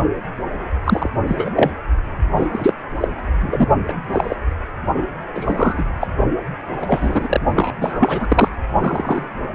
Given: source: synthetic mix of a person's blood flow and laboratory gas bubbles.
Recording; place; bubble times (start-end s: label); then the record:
Doppler ultrasound of blood flow; precordium
0.84-1.10 s: bubbles
1.27-1.52 s: bubbles
1.56-1.71 s: bubbles
2.36-2.73 s: bubbles
3.00-3.08 s: bubbles
3.41-3.68 s: bubbles
3.88-3.94 s: bubbles
4.12-4.36 s: bubbles
5.34-5.84 s: bubbles
6.00-6.07 s: bubbles
6.81-7.40 s: bubbles
7.55-7.72 s: bubbles
7.81-8.48 s: bubbles
8.79-9.25 s: bubbles
From the record:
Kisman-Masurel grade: 243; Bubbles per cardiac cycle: several, 3 to 8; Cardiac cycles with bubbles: 100%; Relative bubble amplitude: loud (0.450 to 0.775); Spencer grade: 3 (all of the cardiac periods contain showers or single bubble signals, but not dominating or overriding the cardiac motion signals); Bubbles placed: only in the low amplitude regions of the cardiac cycle